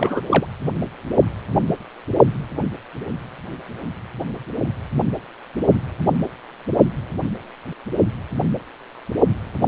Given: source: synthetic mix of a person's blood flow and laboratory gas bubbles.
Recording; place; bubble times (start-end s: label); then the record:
Doppler ultrasound of blood flow; precordium
0.00-0.21 s: bubbles
0.27-0.46 s: bubbles
From the record:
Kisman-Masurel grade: 212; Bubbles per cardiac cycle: several, 3 to 8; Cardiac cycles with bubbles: 1 to 10%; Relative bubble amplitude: moderate (0.250 to 0.450); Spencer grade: 1 (occasional bubble signal discernible with the cardiac motion signal, with majority of cardiac periods free of bubbles); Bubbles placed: only in the low amplitude regions of the cardiac cycle